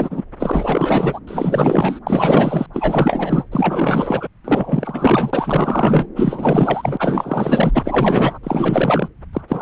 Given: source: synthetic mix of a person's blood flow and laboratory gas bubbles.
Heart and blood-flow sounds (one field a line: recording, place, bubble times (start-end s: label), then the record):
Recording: Doppler ultrasound of blood flow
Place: subclavian vein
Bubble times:
0.00-0.23 s: bubbles
0.39-1.19 s: bubbles
1.27-1.99 s: bubbles
2.06-2.67 s: bubbles
2.73-3.44 s: bubbles
3.52-4.27 s: bubbles
4.44-6.06 s: bubbles
6.15-8.38 s: bubbles
8.43-9.08 s: bubbles
9.33-9.41 s: bubbles
9.48-9.62 s: bubbles
From the record:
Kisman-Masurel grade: 444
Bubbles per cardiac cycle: continuous sound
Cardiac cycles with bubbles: 100%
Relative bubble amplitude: maximal (0.775 to 0.999)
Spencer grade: 4 (maximum detectable bubble signal sounding continuously throughout systole and diastole of every cardiac period, and overriding the amplitude of the normal cardiac signals)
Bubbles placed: anywhere in the cardiac cycle